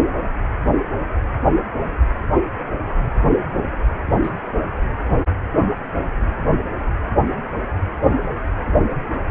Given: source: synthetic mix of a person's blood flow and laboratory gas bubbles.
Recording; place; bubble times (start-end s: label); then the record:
Doppler ultrasound of blood flow; precordium
4.23-4.30 s: bubbles
From the record:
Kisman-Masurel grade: 111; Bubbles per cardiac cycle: 1 to 2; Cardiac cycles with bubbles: 1 to 10%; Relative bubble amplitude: barely perceptible (0.100 to 0.250); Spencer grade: 1 (occasional bubble signal discernible with the cardiac motion signal, with majority of cardiac periods free of bubbles); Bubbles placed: anywhere in the cardiac cycle